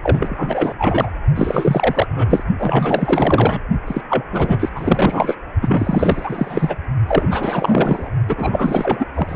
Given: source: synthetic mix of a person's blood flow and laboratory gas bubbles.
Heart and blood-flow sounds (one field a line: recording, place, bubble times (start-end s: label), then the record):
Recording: Doppler ultrasound of blood flow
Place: precordium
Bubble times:
0.02-0.73 s: bubbles
0.78-1.10 s: bubbles
1.34-2.07 s: bubbles
2.16-2.44 s: bubbles
2.58-3.62 s: bubbles
3.87-4.01 s: bubbles
4.09-4.25 s: bubbles
4.30-4.69 s: bubbles
4.75-5.36 s: bubbles
5.62-6.75 s: bubbles
7.07-8.11 s: bubbles
8.29-9.07 s: bubbles
9.14-9.36 s: bubbles
From the record:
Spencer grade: 4 (maximum detectable bubble signal sounding continuously throughout systole and diastole of every cardiac period, and overriding the amplitude of the normal cardiac signals)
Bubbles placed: only in the low amplitude regions of the cardiac cycle